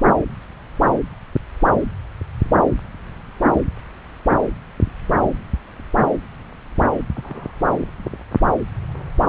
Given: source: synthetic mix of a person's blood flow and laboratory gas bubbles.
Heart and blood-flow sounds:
Doppler ultrasound of blood flow; subclavian vein
7.16-7.53 s: bubbles
From the record:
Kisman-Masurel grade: 111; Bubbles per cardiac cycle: 1 to 2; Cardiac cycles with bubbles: 1 to 10%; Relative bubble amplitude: barely perceptible (0.100 to 0.250); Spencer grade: 1 (occasional bubble signal discernible with the cardiac motion signal, with majority of cardiac periods free of bubbles); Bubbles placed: anywhere in the cardiac cycle

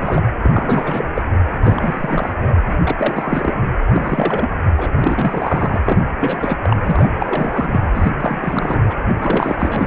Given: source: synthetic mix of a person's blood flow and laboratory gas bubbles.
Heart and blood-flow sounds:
Doppler ultrasound of blood flow; precordium
0.00-0.23 s: bubbles
0.42-1.11 s: bubbles
1.16-1.22 s: bubbles
1.62-2.33 s: bubbles
2.41-2.54 s: bubbles
2.67-2.81 s: bubbles
2.84-2.96 s: bubbles
2.99-3.54 s: bubbles
3.92-4.50 s: bubbles
4.78-4.89 s: bubbles
4.94-5.80 s: bubbles
5.86-6.02 s: bubbles
6.20-6.58 s: bubbles
6.63-6.77 s: bubbles
6.83-7.09 s: bubbles
7.18-7.79 s: bubbles
7.94-8.12 s: bubbles
8.19-8.79 s: bubbles
8.89-8.95 s: bubbles
9.07-9.56 s: bubbles
9.59-9.87 s: bubbles
From the record:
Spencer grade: 3 (all of the cardiac periods contain showers or single bubble signals, but not dominating or overriding the cardiac motion signals); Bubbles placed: anywhere in the cardiac cycle

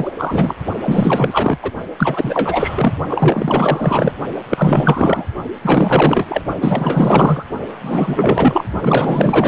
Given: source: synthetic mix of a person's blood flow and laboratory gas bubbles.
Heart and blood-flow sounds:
Doppler ultrasound of blood flow; precordium
0.00-0.12 s: bubbles
0.18-0.55 s: bubbles
0.85-1.58 s: bubbles
1.62-1.72 s: bubbles
1.97-2.93 s: bubbles
3.07-4.13 s: bubbles
4.49-5.25 s: bubbles
5.62-6.42 s: bubbles
6.60-7.46 s: bubbles
7.81-8.64 s: bubbles
8.80-9.48 s: bubbles
From the record:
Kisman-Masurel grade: 444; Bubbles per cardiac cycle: continuous sound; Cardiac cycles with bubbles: 100%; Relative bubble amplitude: maximal (0.775 to 0.999); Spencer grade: 4 (maximum detectable bubble signal sounding continuously throughout systole and diastole of every cardiac period, and overriding the amplitude of the normal cardiac signals); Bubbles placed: only in the low amplitude regions of the cardiac cycle

